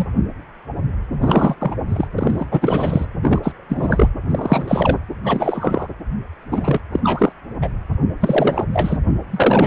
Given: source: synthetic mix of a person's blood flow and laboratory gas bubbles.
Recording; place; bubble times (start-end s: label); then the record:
Doppler ultrasound of blood flow; precordium
0.00-0.06 s: bubbles
1.21-1.55 s: bubbles
1.60-1.75 s: bubbles
1.88-2.07 s: bubbles
2.18-2.46 s: bubbles
2.51-3.05 s: bubbles
3.22-3.40 s: bubbles
3.42-3.52 s: bubbles
3.69-4.08 s: bubbles
4.29-4.98 s: bubbles
5.24-5.88 s: bubbles
6.51-6.80 s: bubbles
6.92-7.00 s: bubbles
7.03-7.32 s: bubbles
7.62-7.69 s: bubbles
8.21-8.64 s: bubbles
8.72-8.98 s: bubbles
9.31-9.67 s: bubbles
From the record:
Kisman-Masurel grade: 333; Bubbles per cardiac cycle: rolling drumbeat, 9 or more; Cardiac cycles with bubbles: 50 to 99%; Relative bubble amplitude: loud (0.450 to 0.775); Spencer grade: 3 (all of the cardiac periods contain showers or single bubble signals, but not dominating or overriding the cardiac motion signals); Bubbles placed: anywhere in the cardiac cycle